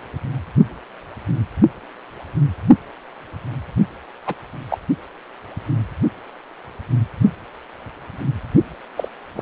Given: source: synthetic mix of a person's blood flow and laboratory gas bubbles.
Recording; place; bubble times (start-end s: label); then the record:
Doppler ultrasound of blood flow; precordium
4.26-4.34 s: bubbles
4.70-4.79 s: bubbles
8.96-9.08 s: bubbles
9.35-9.42 s: bubbles
From the record:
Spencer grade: 2 (many but less than half of the cardiac periods contain bubble signals, singularly or in groups); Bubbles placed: only in the low amplitude regions of the cardiac cycle